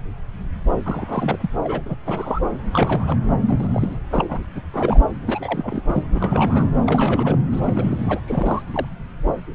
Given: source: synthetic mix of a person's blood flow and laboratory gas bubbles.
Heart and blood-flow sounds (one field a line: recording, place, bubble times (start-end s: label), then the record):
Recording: Doppler ultrasound of blood flow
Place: subclavian vein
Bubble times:
0.84-1.38 s: bubbles
1.41-1.50 s: bubbles
1.64-1.81 s: bubbles
1.86-1.95 s: bubbles
2.06-2.40 s: bubbles
2.72-3.18 s: bubbles
3.49-3.69 s: bubbles
3.71-3.98 s: bubbles
4.11-4.40 s: bubbles
4.44-4.47 s: bubbles
4.55-4.61 s: bubbles
4.73-5.02 s: bubbles
5.27-5.82 s: bubbles
5.88-6.03 s: bubbles
6.12-6.69 s: bubbles
6.86-7.38 s: bubbles
7.52-8.21 s: bubbles
8.27-8.62 s: bubbles
8.72-8.86 s: bubbles
From the record:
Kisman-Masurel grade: 332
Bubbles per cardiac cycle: rolling drumbeat, 9 or more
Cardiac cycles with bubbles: 50 to 99%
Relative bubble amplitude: moderate (0.250 to 0.450)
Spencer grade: 3 (all of the cardiac periods contain showers or single bubble signals, but not dominating or overriding the cardiac motion signals)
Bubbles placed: anywhere in the cardiac cycle